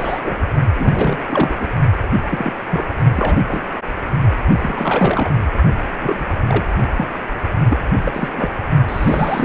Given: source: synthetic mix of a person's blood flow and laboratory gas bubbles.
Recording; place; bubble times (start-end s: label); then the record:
Doppler ultrasound of blood flow; precordium
0.00-0.20 s: bubbles
0.23-0.38 s: bubbles
0.76-1.21 s: bubbles
1.28-1.55 s: bubbles
1.59-1.67 s: bubbles
2.23-2.53 s: bubbles
2.71-2.86 s: bubbles
3.16-3.40 s: bubbles
3.48-3.63 s: bubbles
4.45-5.29 s: bubbles
6.00-6.24 s: bubbles
6.47-6.64 s: bubbles
6.96-7.07 s: bubbles
7.69-7.77 s: bubbles
8.04-8.50 s: bubbles
8.88-9.44 s: bubbles
From the record:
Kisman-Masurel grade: 243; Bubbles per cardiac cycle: several, 3 to 8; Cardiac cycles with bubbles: 100%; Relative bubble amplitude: loud (0.450 to 0.775); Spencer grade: 3 (all of the cardiac periods contain showers or single bubble signals, but not dominating or overriding the cardiac motion signals); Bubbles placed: only in the low amplitude regions of the cardiac cycle